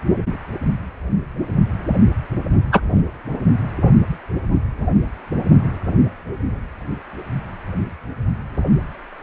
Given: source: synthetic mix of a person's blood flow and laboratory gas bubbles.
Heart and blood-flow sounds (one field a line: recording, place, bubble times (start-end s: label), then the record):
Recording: Doppler ultrasound of blood flow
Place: precordium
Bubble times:
2.72-2.82 s: bubbles
From the record:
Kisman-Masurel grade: 123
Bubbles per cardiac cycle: 1 to 2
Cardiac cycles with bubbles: 10 to 50%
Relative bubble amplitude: loud (0.450 to 0.775)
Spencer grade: 2 (many but less than half of the cardiac periods contain bubble signals, singularly or in groups)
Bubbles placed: only in the low amplitude regions of the cardiac cycle